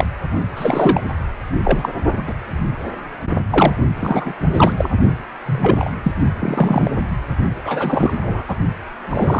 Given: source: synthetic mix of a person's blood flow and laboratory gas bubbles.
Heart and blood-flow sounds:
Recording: Doppler ultrasound of blood flow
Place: precordium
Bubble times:
0.00-0.07 s: bubbles
0.56-1.01 s: bubbles
1.64-1.90 s: bubbles
2.27-2.33 s: bubbles
3.50-3.73 s: bubbles
3.99-4.34 s: bubbles
4.54-4.72 s: bubbles
4.77-4.89 s: bubbles
5.46-5.90 s: bubbles
6.02-6.12 s: bubbles
6.38-6.91 s: bubbles
7.63-8.13 s: bubbles
8.21-8.44 s: bubbles
8.48-8.55 s: bubbles
9.09-9.40 s: bubbles
From the record:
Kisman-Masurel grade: 233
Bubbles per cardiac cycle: several, 3 to 8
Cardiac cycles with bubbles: 50 to 99%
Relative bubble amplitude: loud (0.450 to 0.775)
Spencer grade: 3 (all of the cardiac periods contain showers or single bubble signals, but not dominating or overriding the cardiac motion signals)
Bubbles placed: only in the low amplitude regions of the cardiac cycle

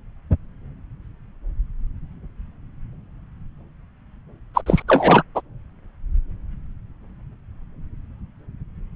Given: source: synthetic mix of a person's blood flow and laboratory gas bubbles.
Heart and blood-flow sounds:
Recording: Doppler ultrasound of blood flow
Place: subclavian vein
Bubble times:
4.54-4.62 s: bubbles
4.66-4.82 s: bubbles
4.88-5.22 s: bubbles
5.35-5.41 s: bubbles
From the record:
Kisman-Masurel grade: 213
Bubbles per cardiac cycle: several, 3 to 8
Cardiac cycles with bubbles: 1 to 10%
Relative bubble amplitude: loud (0.450 to 0.775)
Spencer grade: 1 (occasional bubble signal discernible with the cardiac motion signal, with majority of cardiac periods free of bubbles)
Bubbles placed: anywhere in the cardiac cycle

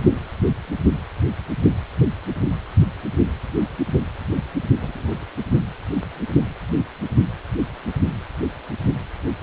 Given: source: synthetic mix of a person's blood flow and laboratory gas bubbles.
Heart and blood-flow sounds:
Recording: Doppler ultrasound of blood flow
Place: precordium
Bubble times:
4.80-5.25 s: bubbles
From the record:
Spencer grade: 1 (occasional bubble signal discernible with the cardiac motion signal, with majority of cardiac periods free of bubbles)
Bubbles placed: only in the low amplitude regions of the cardiac cycle

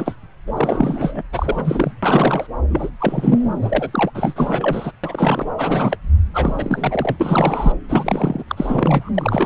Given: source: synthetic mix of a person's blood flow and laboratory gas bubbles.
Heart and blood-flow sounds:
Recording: Doppler ultrasound of blood flow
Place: subclavian vein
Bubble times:
0.00-0.15 s: bubbles
0.47-1.22 s: bubbles
1.32-1.92 s: bubbles
2.02-2.47 s: bubbles
2.69-2.90 s: bubbles
2.98-3.54 s: bubbles
3.62-4.10 s: bubbles
4.14-4.92 s: bubbles
5.04-5.53 s: bubbles
5.58-5.97 s: bubbles
6.33-7.16 s: bubbles
7.20-7.72 s: bubbles
7.88-8.44 s: bubbles
8.47-9.10 s: bubbles
9.14-9.46 s: bubbles
From the record:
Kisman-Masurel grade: 342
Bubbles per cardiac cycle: rolling drumbeat, 9 or more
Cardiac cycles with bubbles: 100%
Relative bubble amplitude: moderate (0.250 to 0.450)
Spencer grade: 3 (all of the cardiac periods contain showers or single bubble signals, but not dominating or overriding the cardiac motion signals)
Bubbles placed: anywhere in the cardiac cycle

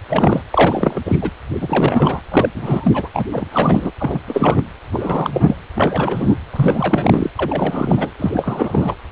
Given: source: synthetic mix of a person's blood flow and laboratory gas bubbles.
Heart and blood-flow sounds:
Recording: Doppler ultrasound of blood flow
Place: precordium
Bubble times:
0.08-0.42 s: bubbles
0.51-1.01 s: bubbles
1.06-1.17 s: bubbles
1.21-1.30 s: bubbles
1.60-2.21 s: bubbles
2.31-2.49 s: bubbles
2.54-3.09 s: bubbles
3.14-3.25 s: bubbles
3.31-3.91 s: bubbles
4.00-4.19 s: bubbles
4.28-4.62 s: bubbles
4.92-5.56 s: bubbles
5.75-6.37 s: bubbles
6.53-7.30 s: bubbles
7.36-8.11 s: bubbles
8.19-8.95 s: bubbles
From the record:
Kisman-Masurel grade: 343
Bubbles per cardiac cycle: rolling drumbeat, 9 or more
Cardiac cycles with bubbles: 100%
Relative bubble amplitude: loud (0.450 to 0.775)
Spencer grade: 3 (all of the cardiac periods contain showers or single bubble signals, but not dominating or overriding the cardiac motion signals)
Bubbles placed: anywhere in the cardiac cycle

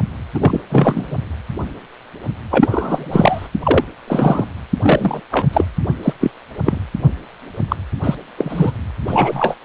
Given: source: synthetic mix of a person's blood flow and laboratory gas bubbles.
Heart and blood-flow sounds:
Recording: Doppler ultrasound of blood flow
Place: precordium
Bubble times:
0.34-0.60 s: bubbles
0.70-1.19 s: bubbles
2.50-3.48 s: bubbles
3.63-3.84 s: bubbles
4.07-4.44 s: bubbles
4.82-5.20 s: bubbles
5.31-5.46 s: bubbles
5.53-5.64 s: bubbles
6.03-6.13 s: bubbles
6.21-6.31 s: bubbles
6.65-6.81 s: bubbles
7.68-7.76 s: bubbles
8.04-8.15 s: bubbles
8.36-8.72 s: bubbles
9.07-9.54 s: bubbles
From the record:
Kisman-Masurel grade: 233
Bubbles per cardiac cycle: several, 3 to 8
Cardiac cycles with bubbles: 50 to 99%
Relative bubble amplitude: loud (0.450 to 0.775)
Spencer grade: 3 (all of the cardiac periods contain showers or single bubble signals, but not dominating or overriding the cardiac motion signals)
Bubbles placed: anywhere in the cardiac cycle

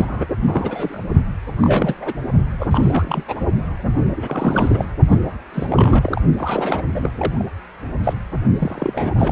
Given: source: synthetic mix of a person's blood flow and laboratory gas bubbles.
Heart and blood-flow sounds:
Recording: Doppler ultrasound of blood flow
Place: precordium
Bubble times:
0.00-0.26 s: bubbles
0.47-1.03 s: bubbles
1.57-2.14 s: bubbles
2.59-2.67 s: bubbles
2.71-3.24 s: bubbles
3.28-3.35 s: bubbles
4.16-4.86 s: bubbles
5.11-5.21 s: bubbles
5.53-6.21 s: bubbles
6.38-6.82 s: bubbles
6.92-7.11 s: bubbles
7.16-7.45 s: bubbles
8.04-8.13 s: bubbles
8.60-9.32 s: bubbles
From the record:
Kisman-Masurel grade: 342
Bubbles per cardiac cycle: rolling drumbeat, 9 or more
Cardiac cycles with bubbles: 100%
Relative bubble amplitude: moderate (0.250 to 0.450)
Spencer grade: 3 (all of the cardiac periods contain showers or single bubble signals, but not dominating or overriding the cardiac motion signals)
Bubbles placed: only in the low amplitude regions of the cardiac cycle

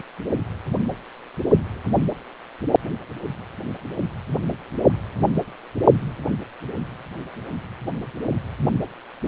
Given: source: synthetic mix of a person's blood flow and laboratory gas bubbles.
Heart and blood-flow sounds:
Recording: Doppler ultrasound of blood flow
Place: precordium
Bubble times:
0.00-0.04 s: bubbles
From the record:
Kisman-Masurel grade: 213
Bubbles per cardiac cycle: several, 3 to 8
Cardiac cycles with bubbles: 1 to 10%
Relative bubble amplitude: loud (0.450 to 0.775)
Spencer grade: 1 (occasional bubble signal discernible with the cardiac motion signal, with majority of cardiac periods free of bubbles)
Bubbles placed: only in the low amplitude regions of the cardiac cycle

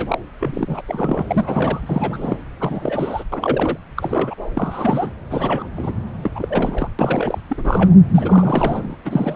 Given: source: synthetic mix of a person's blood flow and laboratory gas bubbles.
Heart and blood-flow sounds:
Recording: Doppler ultrasound of blood flow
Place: subclavian vein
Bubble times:
0.00-0.18 s: bubbles
0.40-0.81 s: bubbles
0.87-1.23 s: bubbles
1.27-1.81 s: bubbles
1.86-2.40 s: bubbles
2.60-3.23 s: bubbles
3.32-3.78 s: bubbles
3.96-4.35 s: bubbles
4.54-5.11 s: bubbles
5.30-5.70 s: bubbles
5.76-5.92 s: bubbles
6.21-6.32 s: bubbles
6.34-6.89 s: bubbles
6.99-7.41 s: bubbles
7.49-7.94 s: bubbles
8.14-8.96 s: bubbles
9.05-9.36 s: bubbles
From the record:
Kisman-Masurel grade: 342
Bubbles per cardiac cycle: rolling drumbeat, 9 or more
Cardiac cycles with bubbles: 100%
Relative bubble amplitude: moderate (0.250 to 0.450)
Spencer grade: 3 (all of the cardiac periods contain showers or single bubble signals, but not dominating or overriding the cardiac motion signals)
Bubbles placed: anywhere in the cardiac cycle

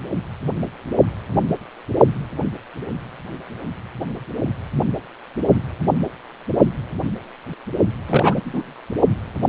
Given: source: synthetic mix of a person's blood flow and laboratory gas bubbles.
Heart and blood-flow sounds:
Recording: Doppler ultrasound of blood flow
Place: precordium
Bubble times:
8.06-8.42 s: bubbles
8.45-8.73 s: bubbles
From the record:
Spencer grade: 1 (occasional bubble signal discernible with the cardiac motion signal, with majority of cardiac periods free of bubbles)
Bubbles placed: only in the low amplitude regions of the cardiac cycle

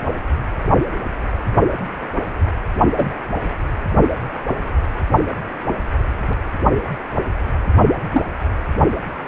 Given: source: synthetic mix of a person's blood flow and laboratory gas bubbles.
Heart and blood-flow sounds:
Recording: Doppler ultrasound of blood flow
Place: precordium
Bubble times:
2.97-3.14 s: bubbles
8.12-8.22 s: bubbles
From the record:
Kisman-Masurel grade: 123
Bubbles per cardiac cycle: 1 to 2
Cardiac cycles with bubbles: 10 to 50%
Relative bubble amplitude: loud (0.450 to 0.775)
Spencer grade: 2 (many but less than half of the cardiac periods contain bubble signals, singularly or in groups)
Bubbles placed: only in the low amplitude regions of the cardiac cycle

